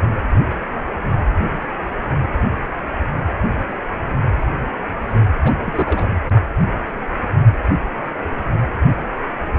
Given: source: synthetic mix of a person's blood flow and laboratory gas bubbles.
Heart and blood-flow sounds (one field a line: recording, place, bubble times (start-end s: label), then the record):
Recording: Doppler ultrasound of blood flow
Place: precordium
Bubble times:
5.41-5.52 s: bubbles
5.58-6.08 s: bubbles
From the record:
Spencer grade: 1 (occasional bubble signal discernible with the cardiac motion signal, with majority of cardiac periods free of bubbles)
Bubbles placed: only in the low amplitude regions of the cardiac cycle